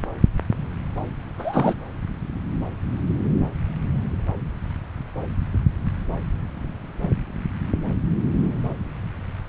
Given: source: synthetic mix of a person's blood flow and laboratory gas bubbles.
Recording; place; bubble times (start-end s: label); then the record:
Doppler ultrasound of blood flow; subclavian vein
1.38-1.74 s: bubbles
From the record:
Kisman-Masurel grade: 223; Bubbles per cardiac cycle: several, 3 to 8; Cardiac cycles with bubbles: 10 to 50%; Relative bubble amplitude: loud (0.450 to 0.775); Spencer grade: 2 (many but less than half of the cardiac periods contain bubble signals, singularly or in groups); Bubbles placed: anywhere in the cardiac cycle